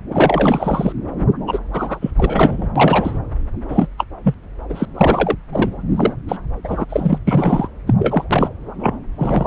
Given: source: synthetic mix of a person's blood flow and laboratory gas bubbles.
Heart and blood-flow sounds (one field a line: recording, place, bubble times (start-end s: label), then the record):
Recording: Doppler ultrasound of blood flow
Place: subclavian vein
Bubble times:
0.10-0.92 s: bubbles
1.46-1.58 s: bubbles
1.73-2.10 s: bubbles
2.18-2.71 s: bubbles
2.76-3.20 s: bubbles
3.69-3.88 s: bubbles
3.98-4.05 s: bubbles
4.23-4.34 s: bubbles
4.69-4.86 s: bubbles
4.95-5.36 s: bubbles
5.53-5.70 s: bubbles
5.96-6.13 s: bubbles
6.28-6.38 s: bubbles
6.63-6.85 s: bubbles
6.89-7.19 s: bubbles
7.27-7.69 s: bubbles
7.87-7.94 s: bubbles
7.99-8.24 s: bubbles
8.30-8.49 s: bubbles
8.79-8.97 s: bubbles
9.17-9.46 s: bubbles
From the record:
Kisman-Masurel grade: 343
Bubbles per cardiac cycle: rolling drumbeat, 9 or more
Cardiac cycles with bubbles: 100%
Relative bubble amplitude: loud (0.450 to 0.775)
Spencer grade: 3 (all of the cardiac periods contain showers or single bubble signals, but not dominating or overriding the cardiac motion signals)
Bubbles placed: anywhere in the cardiac cycle